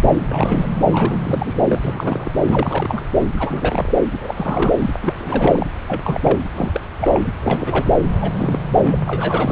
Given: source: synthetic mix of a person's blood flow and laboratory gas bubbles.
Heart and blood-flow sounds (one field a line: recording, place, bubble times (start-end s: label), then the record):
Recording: Doppler ultrasound of blood flow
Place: subclavian vein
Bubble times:
0.00-0.11 s: bubbles
0.31-0.68 s: bubbles
0.92-1.60 s: bubbles
1.66-2.30 s: bubbles
2.42-3.03 s: bubbles
3.34-3.94 s: bubbles
4.13-4.75 s: bubbles
4.78-4.91 s: bubbles
5.02-5.67 s: bubbles
5.87-6.40 s: bubbles
6.54-6.81 s: bubbles
7.00-7.32 s: bubbles
7.42-7.91 s: bubbles
8.21-8.32 s: bubbles
8.36-8.59 s: bubbles
8.73-9.02 s: bubbles
9.06-9.52 s: bubbles
From the record:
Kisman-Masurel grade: 342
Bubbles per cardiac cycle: rolling drumbeat, 9 or more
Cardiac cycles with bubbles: 100%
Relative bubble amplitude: moderate (0.250 to 0.450)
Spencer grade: 3 (all of the cardiac periods contain showers or single bubble signals, but not dominating or overriding the cardiac motion signals)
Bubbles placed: anywhere in the cardiac cycle